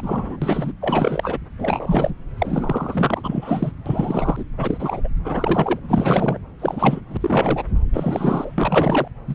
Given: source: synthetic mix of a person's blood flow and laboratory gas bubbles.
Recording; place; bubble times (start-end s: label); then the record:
Doppler ultrasound of blood flow; subclavian vein
0.00-0.38 s: bubbles
0.42-0.72 s: bubbles
0.81-1.38 s: bubbles
1.59-2.11 s: bubbles
2.38-3.72 s: bubbles
3.86-4.44 s: bubbles
4.58-5.00 s: bubbles
5.04-5.08 s: bubbles
5.24-5.79 s: bubbles
5.88-6.38 s: bubbles
6.58-7.00 s: bubbles
7.10-7.17 s: bubbles
7.21-7.63 s: bubbles
7.93-8.51 s: bubbles
8.58-9.08 s: bubbles
9.28-9.34 s: bubbles
From the record:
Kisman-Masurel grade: 342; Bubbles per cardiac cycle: rolling drumbeat, 9 or more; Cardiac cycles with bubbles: 100%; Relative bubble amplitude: moderate (0.250 to 0.450); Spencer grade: 3 (all of the cardiac periods contain showers or single bubble signals, but not dominating or overriding the cardiac motion signals); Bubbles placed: anywhere in the cardiac cycle